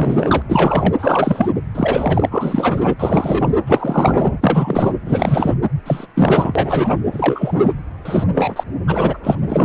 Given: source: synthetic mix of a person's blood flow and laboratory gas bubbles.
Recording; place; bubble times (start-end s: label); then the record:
Doppler ultrasound of blood flow; precordium
0.00-0.42 s: bubbles
0.49-0.94 s: bubbles
0.98-1.49 s: bubbles
1.74-2.94 s: bubbles
2.99-3.52 s: bubbles
3.66-4.38 s: bubbles
4.41-4.92 s: bubbles
5.05-5.54 s: bubbles
5.85-6.07 s: bubbles
6.15-7.00 s: bubbles
7.12-7.73 s: bubbles
8.05-8.24 s: bubbles
8.34-8.63 s: bubbles
8.87-9.18 s: bubbles
9.23-9.36 s: bubbles
9.46-9.65 s: bubbles
From the record:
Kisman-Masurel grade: 343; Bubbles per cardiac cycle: rolling drumbeat, 9 or more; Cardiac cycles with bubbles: 100%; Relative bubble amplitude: loud (0.450 to 0.775); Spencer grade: 3 (all of the cardiac periods contain showers or single bubble signals, but not dominating or overriding the cardiac motion signals); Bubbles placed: anywhere in the cardiac cycle